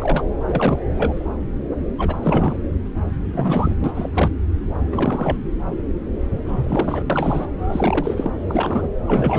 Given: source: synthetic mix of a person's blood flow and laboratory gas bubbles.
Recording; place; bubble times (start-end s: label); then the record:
Doppler ultrasound of blood flow; subclavian vein
0.00-0.23 s: bubbles
0.46-0.79 s: bubbles
0.89-1.25 s: bubbles
1.98-2.56 s: bubbles
3.33-3.75 s: bubbles
3.84-3.92 s: bubbles
3.94-4.09 s: bubbles
4.13-4.30 s: bubbles
4.92-5.39 s: bubbles
6.46-7.04 s: bubbles
7.09-7.47 s: bubbles
7.69-8.31 s: bubbles
8.49-8.88 s: bubbles
9.06-9.38 s: bubbles
From the record:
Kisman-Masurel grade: 332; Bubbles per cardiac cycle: rolling drumbeat, 9 or more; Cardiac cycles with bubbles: 50 to 99%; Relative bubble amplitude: moderate (0.250 to 0.450); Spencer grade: 3 (all of the cardiac periods contain showers or single bubble signals, but not dominating or overriding the cardiac motion signals); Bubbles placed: anywhere in the cardiac cycle